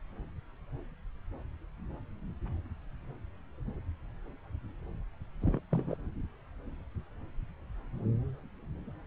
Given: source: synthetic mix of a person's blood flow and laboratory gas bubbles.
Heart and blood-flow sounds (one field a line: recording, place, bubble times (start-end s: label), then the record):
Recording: Doppler ultrasound of blood flow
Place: subclavian vein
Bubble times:
5.41-5.59 s: bubbles
5.71-5.96 s: bubbles
From the record:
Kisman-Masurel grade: 211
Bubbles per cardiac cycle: several, 3 to 8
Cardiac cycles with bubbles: 1 to 10%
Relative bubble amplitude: barely perceptible (0.100 to 0.250)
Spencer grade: 1 (occasional bubble signal discernible with the cardiac motion signal, with majority of cardiac periods free of bubbles)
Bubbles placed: anywhere in the cardiac cycle